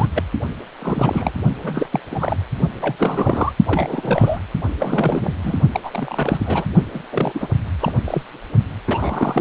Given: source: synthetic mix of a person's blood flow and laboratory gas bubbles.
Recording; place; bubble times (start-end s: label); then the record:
Doppler ultrasound of blood flow; precordium
0.00-0.07 s: bubbles
0.16-0.23 s: bubbles
0.81-1.32 s: bubbles
1.59-2.00 s: bubbles
2.09-2.36 s: bubbles
2.76-3.52 s: bubbles
3.67-4.39 s: bubbles
4.79-5.34 s: bubbles
5.42-5.62 s: bubbles
5.71-5.80 s: bubbles
5.83-6.66 s: bubbles
6.94-7.02 s: bubbles
7.12-7.48 s: bubbles
7.79-7.92 s: bubbles
8.04-8.22 s: bubbles
8.87-9.41 s: bubbles
From the record:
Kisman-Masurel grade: 342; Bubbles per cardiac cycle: rolling drumbeat, 9 or more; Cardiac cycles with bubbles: 100%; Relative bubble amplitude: moderate (0.250 to 0.450); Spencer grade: 3 (all of the cardiac periods contain showers or single bubble signals, but not dominating or overriding the cardiac motion signals); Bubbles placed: only in the low amplitude regions of the cardiac cycle